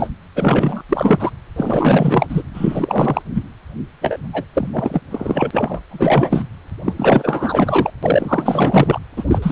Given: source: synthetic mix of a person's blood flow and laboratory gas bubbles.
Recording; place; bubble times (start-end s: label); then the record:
Doppler ultrasound of blood flow; precordium
0.00-0.09 s: bubbles
0.36-0.82 s: bubbles
0.89-1.30 s: bubbles
1.56-2.27 s: bubbles
2.29-2.42 s: bubbles
2.54-3.23 s: bubbles
3.34-3.42 s: bubbles
4.01-4.17 s: bubbles
4.33-4.44 s: bubbles
4.54-4.70 s: bubbles
4.72-5.00 s: bubbles
5.11-5.80 s: bubbles
5.91-6.43 s: bubbles
6.84-6.93 s: bubbles
6.96-7.90 s: bubbles
8.03-8.99 s: bubbles
9.16-9.24 s: bubbles
9.27-9.39 s: bubbles
9.42-9.51 s: bubbles
From the record:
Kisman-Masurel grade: 444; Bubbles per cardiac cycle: continuous sound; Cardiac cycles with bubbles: 100%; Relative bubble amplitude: maximal (0.775 to 0.999); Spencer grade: 4 (maximum detectable bubble signal sounding continuously throughout systole and diastole of every cardiac period, and overriding the amplitude of the normal cardiac signals); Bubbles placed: anywhere in the cardiac cycle